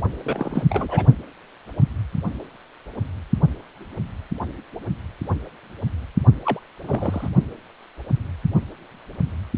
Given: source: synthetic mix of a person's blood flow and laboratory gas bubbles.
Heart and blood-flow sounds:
Doppler ultrasound of blood flow; precordium
0.24-0.64 s: bubbles
0.70-1.06 s: bubbles
6.45-6.60 s: bubbles
6.83-7.29 s: bubbles
From the record:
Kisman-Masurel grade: 222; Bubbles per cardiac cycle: several, 3 to 8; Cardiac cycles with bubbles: 10 to 50%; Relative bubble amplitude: moderate (0.250 to 0.450); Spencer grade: 2 (many but less than half of the cardiac periods contain bubble signals, singularly or in groups); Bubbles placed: only in the low amplitude regions of the cardiac cycle

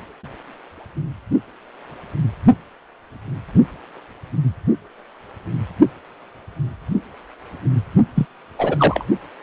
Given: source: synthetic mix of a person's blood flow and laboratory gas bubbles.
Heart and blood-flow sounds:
Doppler ultrasound of blood flow; precordium
8.15-8.27 s: bubbles
8.59-9.04 s: bubbles
From the record:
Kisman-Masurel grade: 212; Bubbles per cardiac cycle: several, 3 to 8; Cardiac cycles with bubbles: 1 to 10%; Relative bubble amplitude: moderate (0.250 to 0.450); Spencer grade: 1 (occasional bubble signal discernible with the cardiac motion signal, with majority of cardiac periods free of bubbles); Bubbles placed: only in the low amplitude regions of the cardiac cycle

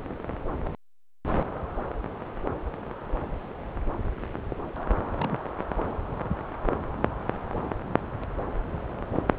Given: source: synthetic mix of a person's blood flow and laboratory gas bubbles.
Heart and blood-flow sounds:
Doppler ultrasound of blood flow; subclavian vein
5.15-5.40 s: bubbles
From the record:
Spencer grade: 1 (occasional bubble signal discernible with the cardiac motion signal, with majority of cardiac periods free of bubbles); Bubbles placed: anywhere in the cardiac cycle

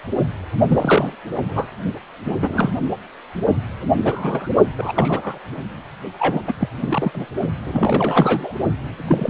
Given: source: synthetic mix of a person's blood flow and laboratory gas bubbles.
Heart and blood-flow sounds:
Doppler ultrasound of blood flow; precordium
0.68-1.16 s: bubbles
1.41-1.68 s: bubbles
2.23-2.71 s: bubbles
4.05-4.49 s: bubbles
4.77-4.92 s: bubbles
4.95-5.39 s: bubbles
6.18-6.43 s: bubbles
6.46-6.53 s: bubbles
6.60-6.69 s: bubbles
6.80-7.11 s: bubbles
7.14-7.26 s: bubbles
7.64-8.54 s: bubbles
9.08-9.29 s: bubbles
From the record:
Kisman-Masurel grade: 233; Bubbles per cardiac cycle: several, 3 to 8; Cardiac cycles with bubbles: 50 to 99%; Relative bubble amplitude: loud (0.450 to 0.775); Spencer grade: 3 (all of the cardiac periods contain showers or single bubble signals, but not dominating or overriding the cardiac motion signals); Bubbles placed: only in the low amplitude regions of the cardiac cycle

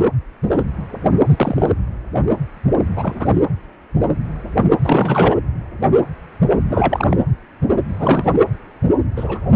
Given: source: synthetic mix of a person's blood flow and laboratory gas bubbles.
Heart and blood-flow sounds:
Doppler ultrasound of blood flow; precordium
1.26-1.68 s: bubbles
2.95-3.46 s: bubbles
4.81-5.38 s: bubbles
6.69-7.17 s: bubbles
7.88-8.32 s: bubbles
9.17-9.46 s: bubbles
From the record:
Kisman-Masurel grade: 222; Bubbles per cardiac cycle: several, 3 to 8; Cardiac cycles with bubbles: 10 to 50%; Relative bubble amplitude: moderate (0.250 to 0.450); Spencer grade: 2 (many but less than half of the cardiac periods contain bubble signals, singularly or in groups); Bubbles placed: anywhere in the cardiac cycle

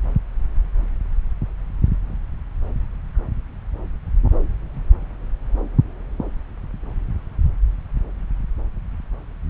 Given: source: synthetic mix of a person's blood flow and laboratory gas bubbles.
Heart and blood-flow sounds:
Doppler ultrasound of blood flow; subclavian vein
no bubbles
From the record:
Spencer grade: 0 (complete lack of bubble signals)

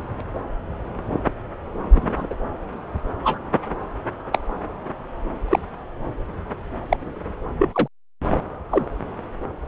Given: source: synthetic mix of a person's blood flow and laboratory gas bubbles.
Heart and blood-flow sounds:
Doppler ultrasound of blood flow; subclavian vein
1.94-2.27 s: bubbles
2.29-2.34 s: bubbles
3.24-3.38 s: bubbles
4.32-4.39 s: bubbles
5.48-5.59 s: bubbles
6.90-6.97 s: bubbles
7.58-7.69 s: bubbles
7.73-7.88 s: bubbles
8.30-8.38 s: bubbles
8.71-8.85 s: bubbles
From the record:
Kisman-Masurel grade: 122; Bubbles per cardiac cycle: 1 to 2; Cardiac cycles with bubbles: 10 to 50%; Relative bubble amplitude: moderate (0.250 to 0.450); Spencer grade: 2 (many but less than half of the cardiac periods contain bubble signals, singularly or in groups); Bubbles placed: anywhere in the cardiac cycle

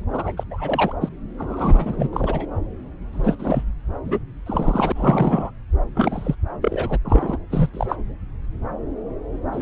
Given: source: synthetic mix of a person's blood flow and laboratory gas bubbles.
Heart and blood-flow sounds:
Doppler ultrasound of blood flow; subclavian vein
0.12-0.32 s: bubbles
0.37-0.43 s: bubbles
0.51-0.93 s: bubbles
1.01-1.09 s: bubbles
1.38-2.08 s: bubbles
2.12-2.46 s: bubbles
3.12-3.35 s: bubbles
3.39-3.63 s: bubbles
4.04-4.19 s: bubbles
4.46-4.92 s: bubbles
4.95-5.50 s: bubbles
5.95-6.35 s: bubbles
6.61-6.98 s: bubbles
7.04-7.38 s: bubbles
7.50-7.70 s: bubbles
7.74-7.96 s: bubbles
9.52-9.62 s: bubbles
From the record:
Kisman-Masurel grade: 232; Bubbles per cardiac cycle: several, 3 to 8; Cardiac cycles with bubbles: 50 to 99%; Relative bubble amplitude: moderate (0.250 to 0.450); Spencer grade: 3 (all of the cardiac periods contain showers or single bubble signals, but not dominating or overriding the cardiac motion signals); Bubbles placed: anywhere in the cardiac cycle

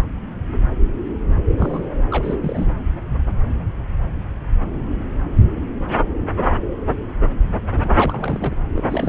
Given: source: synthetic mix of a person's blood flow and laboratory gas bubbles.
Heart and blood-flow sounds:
Doppler ultrasound of blood flow; subclavian vein
0.00-0.05 s: bubbles
1.58-1.89 s: bubbles
2.10-2.68 s: bubbles
7.76-7.90 s: bubbles
7.96-8.56 s: bubbles
8.72-8.86 s: bubbles
8.89-9.09 s: bubbles
From the record:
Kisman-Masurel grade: 221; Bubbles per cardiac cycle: several, 3 to 8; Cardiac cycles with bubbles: 10 to 50%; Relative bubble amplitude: barely perceptible (0.100 to 0.250); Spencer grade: 2 (many but less than half of the cardiac periods contain bubble signals, singularly or in groups); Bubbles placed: anywhere in the cardiac cycle

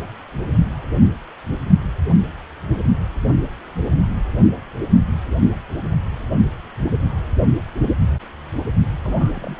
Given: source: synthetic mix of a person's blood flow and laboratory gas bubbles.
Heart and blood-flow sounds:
Doppler ultrasound of blood flow; precordium
9.04-9.60 s: bubbles
From the record:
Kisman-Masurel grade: 211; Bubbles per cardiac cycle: several, 3 to 8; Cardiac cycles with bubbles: 1 to 10%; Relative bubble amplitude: barely perceptible (0.100 to 0.250); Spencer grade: 1 (occasional bubble signal discernible with the cardiac motion signal, with majority of cardiac periods free of bubbles); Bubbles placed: only in the low amplitude regions of the cardiac cycle

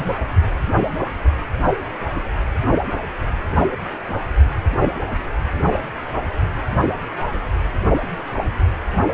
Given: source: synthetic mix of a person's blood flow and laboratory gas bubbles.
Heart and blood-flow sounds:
Doppler ultrasound of blood flow; precordium
0.00-0.15 s: bubbles
From the record:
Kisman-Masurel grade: 211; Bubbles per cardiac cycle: several, 3 to 8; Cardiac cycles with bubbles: 1 to 10%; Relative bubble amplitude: barely perceptible (0.100 to 0.250); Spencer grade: 1 (occasional bubble signal discernible with the cardiac motion signal, with majority of cardiac periods free of bubbles); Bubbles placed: only in the low amplitude regions of the cardiac cycle

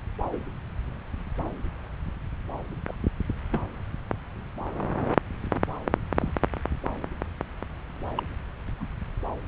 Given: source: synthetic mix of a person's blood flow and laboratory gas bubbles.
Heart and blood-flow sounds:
Doppler ultrasound of blood flow; subclavian vein
0.33-0.37 s: bubbles
2.88-2.96 s: bubbles
3.52-3.60 s: bubbles
6.20-6.32 s: bubbles
8.17-8.22 s: bubbles
8.80-8.86 s: bubbles
From the record:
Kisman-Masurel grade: 121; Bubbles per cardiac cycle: 1 to 2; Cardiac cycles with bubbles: 10 to 50%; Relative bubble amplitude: barely perceptible (0.100 to 0.250); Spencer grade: 2 (many but less than half of the cardiac periods contain bubble signals, singularly or in groups); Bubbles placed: anywhere in the cardiac cycle

